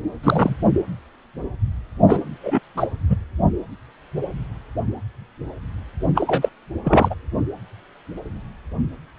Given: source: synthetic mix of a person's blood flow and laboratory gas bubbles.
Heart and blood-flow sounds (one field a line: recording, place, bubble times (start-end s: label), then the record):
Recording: Doppler ultrasound of blood flow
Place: precordium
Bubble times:
0.23-0.55 s: bubbles
2.06-2.21 s: bubbles
2.42-2.59 s: bubbles
2.76-2.88 s: bubbles
3.09-3.17 s: bubbles
6.14-6.49 s: bubbles
6.84-7.15 s: bubbles
From the record:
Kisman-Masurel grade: 223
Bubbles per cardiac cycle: several, 3 to 8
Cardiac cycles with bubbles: 10 to 50%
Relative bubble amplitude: loud (0.450 to 0.775)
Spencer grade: 2 (many but less than half of the cardiac periods contain bubble signals, singularly or in groups)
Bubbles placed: anywhere in the cardiac cycle